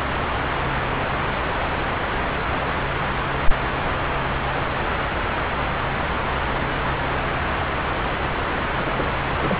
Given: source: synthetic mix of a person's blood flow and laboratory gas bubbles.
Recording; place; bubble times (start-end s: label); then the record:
Doppler ultrasound of blood flow; subclavian vein
8.77-8.93 s: bubbles
8.96-9.12 s: bubbles
9.29-9.34 s: bubbles
9.36-9.58 s: bubbles
From the record:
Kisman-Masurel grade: 211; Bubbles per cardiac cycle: several, 3 to 8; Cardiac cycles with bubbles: 1 to 10%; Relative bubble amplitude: barely perceptible (0.100 to 0.250); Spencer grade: 1 (occasional bubble signal discernible with the cardiac motion signal, with majority of cardiac periods free of bubbles); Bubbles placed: anywhere in the cardiac cycle